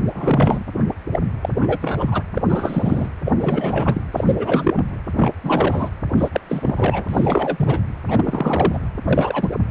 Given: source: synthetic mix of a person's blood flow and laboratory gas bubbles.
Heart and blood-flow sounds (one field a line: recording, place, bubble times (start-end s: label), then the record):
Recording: Doppler ultrasound of blood flow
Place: precordium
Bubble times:
0.09-0.64 s: bubbles
1.12-1.20 s: bubbles
1.41-1.49 s: bubbles
1.61-1.78 s: bubbles
1.81-2.23 s: bubbles
2.35-2.42 s: bubbles
2.49-3.08 s: bubbles
3.25-3.33 s: bubbles
3.38-4.01 s: bubbles
4.13-4.84 s: bubbles
5.16-5.32 s: bubbles
5.43-5.90 s: bubbles
6.17-6.29 s: bubbles
6.32-6.41 s: bubbles
6.46-7.83 s: bubbles
8.07-8.79 s: bubbles
9.04-9.49 s: bubbles
9.52-9.56 s: bubbles
From the record:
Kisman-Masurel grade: 343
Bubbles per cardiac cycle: rolling drumbeat, 9 or more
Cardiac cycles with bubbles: 100%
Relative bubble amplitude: loud (0.450 to 0.775)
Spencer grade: 3 (all of the cardiac periods contain showers or single bubble signals, but not dominating or overriding the cardiac motion signals)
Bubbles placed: anywhere in the cardiac cycle